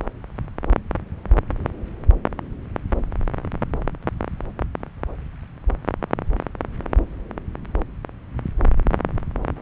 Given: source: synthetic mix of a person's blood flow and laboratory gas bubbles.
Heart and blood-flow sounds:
Doppler ultrasound of blood flow; subclavian vein
no bubbles
From the record:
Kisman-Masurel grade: 000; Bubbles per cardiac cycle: 0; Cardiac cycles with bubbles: 0%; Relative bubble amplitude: no bubbles discernible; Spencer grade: 0 (complete lack of bubble signals)

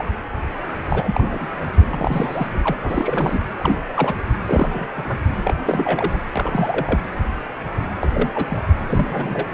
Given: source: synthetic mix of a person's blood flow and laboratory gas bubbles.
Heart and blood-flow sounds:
Doppler ultrasound of blood flow; precordium
0.00-0.05 s: bubbles
0.89-1.47 s: bubbles
1.89-2.77 s: bubbles
2.82-3.45 s: bubbles
3.60-3.77 s: bubbles
3.94-4.15 s: bubbles
4.47-4.67 s: bubbles
4.71-5.17 s: bubbles
5.44-5.54 s: bubbles
5.65-6.21 s: bubbles
6.35-6.98 s: bubbles
8.01-8.08 s: bubbles
8.11-8.46 s: bubbles
8.49-8.59 s: bubbles
8.88-9.48 s: bubbles
From the record:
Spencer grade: 3 (all of the cardiac periods contain showers or single bubble signals, but not dominating or overriding the cardiac motion signals); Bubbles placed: anywhere in the cardiac cycle

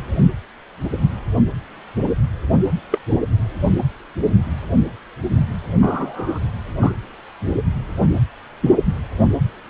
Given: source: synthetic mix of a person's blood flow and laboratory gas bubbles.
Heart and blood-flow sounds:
Doppler ultrasound of blood flow; precordium
2.92-2.98 s: bubbles
5.81-6.39 s: bubbles
6.80-6.93 s: bubbles
From the record:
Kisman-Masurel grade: 122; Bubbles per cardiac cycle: 1 to 2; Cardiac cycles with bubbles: 10 to 50%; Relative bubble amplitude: moderate (0.250 to 0.450); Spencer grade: 2 (many but less than half of the cardiac periods contain bubble signals, singularly or in groups); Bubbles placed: anywhere in the cardiac cycle

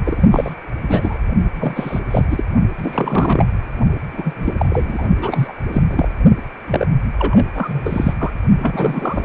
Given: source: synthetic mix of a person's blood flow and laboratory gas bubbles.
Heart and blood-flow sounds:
Doppler ultrasound of blood flow; precordium
0.04-0.55 s: bubbles
0.82-1.18 s: bubbles
1.56-2.00 s: bubbles
2.10-2.25 s: bubbles
2.30-2.45 s: bubbles
2.78-3.46 s: bubbles
4.12-4.33 s: bubbles
4.36-5.08 s: bubbles
5.21-5.53 s: bubbles
5.69-5.82 s: bubbles
5.87-6.08 s: bubbles
6.67-6.85 s: bubbles
7.18-7.45 s: bubbles
7.54-8.14 s: bubbles
8.19-8.31 s: bubbles
8.59-9.25 s: bubbles
From the record:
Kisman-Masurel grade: 343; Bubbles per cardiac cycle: rolling drumbeat, 9 or more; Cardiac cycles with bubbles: 100%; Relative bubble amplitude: loud (0.450 to 0.775); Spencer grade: 3 (all of the cardiac periods contain showers or single bubble signals, but not dominating or overriding the cardiac motion signals); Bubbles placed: only in the low amplitude regions of the cardiac cycle

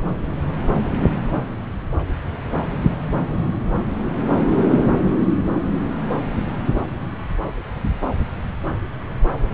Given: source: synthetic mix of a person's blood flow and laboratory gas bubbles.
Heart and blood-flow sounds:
Doppler ultrasound of blood flow; subclavian vein
no bubbles
From the record:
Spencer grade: 0 (complete lack of bubble signals)

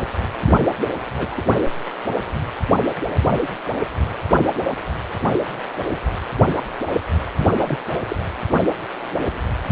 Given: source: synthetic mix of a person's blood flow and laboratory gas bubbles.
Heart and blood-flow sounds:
Doppler ultrasound of blood flow; precordium
0.43-0.58 s: bubbles
1.17-1.44 s: bubbles
7.37-7.48 s: bubbles
7.57-7.78 s: bubbles
8.08-8.16 s: bubbles
From the record:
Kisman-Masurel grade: 221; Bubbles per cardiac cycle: several, 3 to 8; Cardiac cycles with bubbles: 10 to 50%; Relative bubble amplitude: barely perceptible (0.100 to 0.250); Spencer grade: 2 (many but less than half of the cardiac periods contain bubble signals, singularly or in groups); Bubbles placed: anywhere in the cardiac cycle

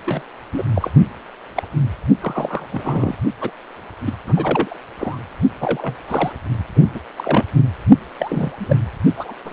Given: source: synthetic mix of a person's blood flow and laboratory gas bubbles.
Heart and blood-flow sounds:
Doppler ultrasound of blood flow; precordium
0.06-0.22 s: bubbles
0.52-0.63 s: bubbles
0.74-0.91 s: bubbles
1.56-1.68 s: bubbles
2.21-2.66 s: bubbles
2.71-3.15 s: bubbles
3.40-3.51 s: bubbles
4.04-4.13 s: bubbles
4.26-4.33 s: bubbles
4.36-4.79 s: bubbles
4.99-5.18 s: bubbles
5.60-5.95 s: bubbles
6.08-6.33 s: bubbles
6.75-6.83 s: bubbles
6.94-7.00 s: bubbles
7.16-7.45 s: bubbles
8.19-8.52 s: bubbles
8.58-8.78 s: bubbles
9.17-9.33 s: bubbles
9.45-9.53 s: bubbles
From the record:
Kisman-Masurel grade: 232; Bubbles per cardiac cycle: several, 3 to 8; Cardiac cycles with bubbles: 50 to 99%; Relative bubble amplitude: moderate (0.250 to 0.450); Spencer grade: 3 (all of the cardiac periods contain showers or single bubble signals, but not dominating or overriding the cardiac motion signals); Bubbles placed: only in the low amplitude regions of the cardiac cycle

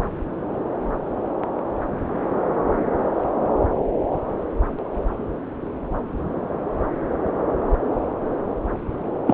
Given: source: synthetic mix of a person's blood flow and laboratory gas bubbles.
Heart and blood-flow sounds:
Doppler ultrasound of blood flow; subclavian vein
9.26-9.34 s: bubbles
From the record:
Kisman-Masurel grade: 213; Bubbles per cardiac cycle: several, 3 to 8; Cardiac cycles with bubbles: 1 to 10%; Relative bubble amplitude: loud (0.450 to 0.775); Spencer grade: 1 (occasional bubble signal discernible with the cardiac motion signal, with majority of cardiac periods free of bubbles); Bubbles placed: anywhere in the cardiac cycle

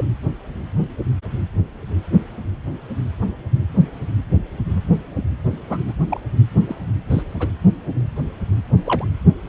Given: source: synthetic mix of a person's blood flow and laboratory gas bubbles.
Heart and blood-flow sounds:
Doppler ultrasound of blood flow; precordium
0.00-0.05 s: bubbles
5.70-5.79 s: bubbles
5.88-5.93 s: bubbles
6.08-6.21 s: bubbles
6.69-6.75 s: bubbles
7.10-7.23 s: bubbles
7.39-7.47 s: bubbles
8.85-9.04 s: bubbles
From the record:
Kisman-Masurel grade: 122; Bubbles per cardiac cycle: 1 to 2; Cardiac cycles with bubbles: 10 to 50%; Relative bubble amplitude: moderate (0.250 to 0.450); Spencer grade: 2 (many but less than half of the cardiac periods contain bubble signals, singularly or in groups); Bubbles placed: anywhere in the cardiac cycle

